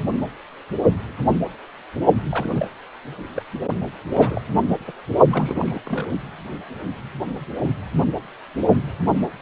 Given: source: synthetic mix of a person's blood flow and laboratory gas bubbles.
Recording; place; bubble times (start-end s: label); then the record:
Doppler ultrasound of blood flow; precordium
2.29-2.52 s: bubbles
2.54-2.68 s: bubbles
3.35-3.43 s: bubbles
4.13-4.42 s: bubbles
4.87-4.92 s: bubbles
5.31-5.80 s: bubbles
5.86-6.19 s: bubbles
From the record:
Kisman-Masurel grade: 221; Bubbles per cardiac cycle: several, 3 to 8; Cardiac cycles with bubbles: 10 to 50%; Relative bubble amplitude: barely perceptible (0.100 to 0.250); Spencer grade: 2 (many but less than half of the cardiac periods contain bubble signals, singularly or in groups); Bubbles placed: only in the low amplitude regions of the cardiac cycle